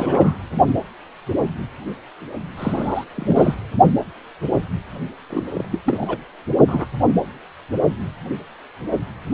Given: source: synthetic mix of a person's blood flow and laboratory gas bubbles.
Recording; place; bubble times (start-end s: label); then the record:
Doppler ultrasound of blood flow; precordium
0.00-0.38 s: bubbles
2.56-3.05 s: bubbles
3.16-3.54 s: bubbles
5.29-5.47 s: bubbles
5.54-5.65 s: bubbles
5.71-5.79 s: bubbles
5.84-6.17 s: bubbles
6.67-6.86 s: bubbles
7.08-7.12 s: bubbles
From the record:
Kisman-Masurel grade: 232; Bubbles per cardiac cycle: several, 3 to 8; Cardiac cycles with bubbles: 50 to 99%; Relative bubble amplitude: moderate (0.250 to 0.450); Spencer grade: 3 (all of the cardiac periods contain showers or single bubble signals, but not dominating or overriding the cardiac motion signals); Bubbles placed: only in the low amplitude regions of the cardiac cycle